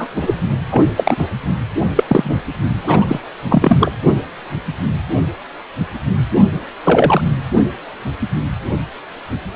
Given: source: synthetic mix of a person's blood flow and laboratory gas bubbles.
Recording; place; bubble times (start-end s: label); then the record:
Doppler ultrasound of blood flow; precordium
0.00-0.07 s: bubbles
0.16-0.35 s: bubbles
0.71-0.84 s: bubbles
0.96-1.27 s: bubbles
1.96-2.04 s: bubbles
2.08-2.42 s: bubbles
2.83-3.21 s: bubbles
3.49-3.92 s: bubbles
6.84-7.21 s: bubbles
From the record:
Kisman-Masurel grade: 233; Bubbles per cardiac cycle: several, 3 to 8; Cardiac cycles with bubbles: 50 to 99%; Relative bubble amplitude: loud (0.450 to 0.775); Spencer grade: 3 (all of the cardiac periods contain showers or single bubble signals, but not dominating or overriding the cardiac motion signals); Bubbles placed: only in the low amplitude regions of the cardiac cycle